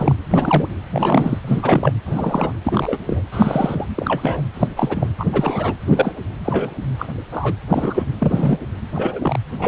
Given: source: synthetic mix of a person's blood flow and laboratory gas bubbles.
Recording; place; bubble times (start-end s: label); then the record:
Doppler ultrasound of blood flow; precordium
0.00-0.17 s: bubbles
0.30-0.69 s: bubbles
0.90-1.39 s: bubbles
1.43-1.93 s: bubbles
2.05-2.51 s: bubbles
2.64-2.98 s: bubbles
3.06-3.22 s: bubbles
3.31-3.87 s: bubbles
3.95-4.42 s: bubbles
4.54-4.68 s: bubbles
4.76-5.08 s: bubbles
5.18-5.26 s: bubbles
5.33-5.74 s: bubbles
5.85-6.15 s: bubbles
6.45-6.71 s: bubbles
6.98-7.07 s: bubbles
7.32-7.54 s: bubbles
7.67-8.05 s: bubbles
8.18-8.59 s: bubbles
8.93-9.39 s: bubbles
9.57-9.68 s: bubbles
From the record:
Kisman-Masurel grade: 233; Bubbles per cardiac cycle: several, 3 to 8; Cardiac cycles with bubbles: 50 to 99%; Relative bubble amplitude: loud (0.450 to 0.775); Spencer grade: 3 (all of the cardiac periods contain showers or single bubble signals, but not dominating or overriding the cardiac motion signals); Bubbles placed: anywhere in the cardiac cycle